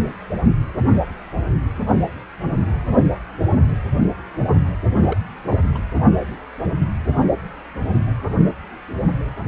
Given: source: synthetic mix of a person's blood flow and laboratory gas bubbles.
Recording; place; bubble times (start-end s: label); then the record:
Doppler ultrasound of blood flow; precordium
4.88-4.95 s: bubbles
5.01-5.18 s: bubbles
5.49-5.57 s: bubbles
5.74-5.78 s: bubbles
From the record:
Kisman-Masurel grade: 211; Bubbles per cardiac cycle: several, 3 to 8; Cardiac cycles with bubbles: 1 to 10%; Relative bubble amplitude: barely perceptible (0.100 to 0.250); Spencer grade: 1 (occasional bubble signal discernible with the cardiac motion signal, with majority of cardiac periods free of bubbles); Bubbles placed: only in the low amplitude regions of the cardiac cycle